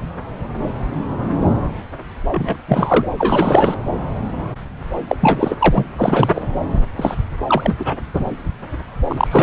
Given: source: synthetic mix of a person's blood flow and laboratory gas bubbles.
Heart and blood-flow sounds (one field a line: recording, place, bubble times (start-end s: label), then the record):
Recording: Doppler ultrasound of blood flow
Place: subclavian vein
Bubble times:
2.31-2.58 s: bubbles
2.68-3.07 s: bubbles
3.18-3.79 s: bubbles
5.08-5.17 s: bubbles
5.21-5.56 s: bubbles
5.58-5.85 s: bubbles
5.97-6.31 s: bubbles
6.36-6.41 s: bubbles
6.96-7.15 s: bubbles
7.47-7.76 s: bubbles
7.79-7.96 s: bubbles
8.13-8.26 s: bubbles
9.07-9.43 s: bubbles
From the record:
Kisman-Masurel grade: 333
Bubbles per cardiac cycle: rolling drumbeat, 9 or more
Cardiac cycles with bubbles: 50 to 99%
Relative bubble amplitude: loud (0.450 to 0.775)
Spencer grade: 3 (all of the cardiac periods contain showers or single bubble signals, but not dominating or overriding the cardiac motion signals)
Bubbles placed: anywhere in the cardiac cycle